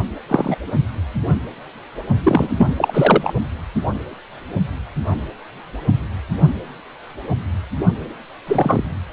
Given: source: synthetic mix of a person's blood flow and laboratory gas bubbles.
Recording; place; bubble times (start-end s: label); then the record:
Doppler ultrasound of blood flow; precordium
0.28-0.56 s: bubbles
2.23-2.53 s: bubbles
2.58-2.73 s: bubbles
2.77-3.33 s: bubbles
8.47-8.83 s: bubbles
From the record:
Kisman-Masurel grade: 233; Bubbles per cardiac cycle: several, 3 to 8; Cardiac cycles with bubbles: 50 to 99%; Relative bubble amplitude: loud (0.450 to 0.775); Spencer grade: 3 (all of the cardiac periods contain showers or single bubble signals, but not dominating or overriding the cardiac motion signals); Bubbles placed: only in the low amplitude regions of the cardiac cycle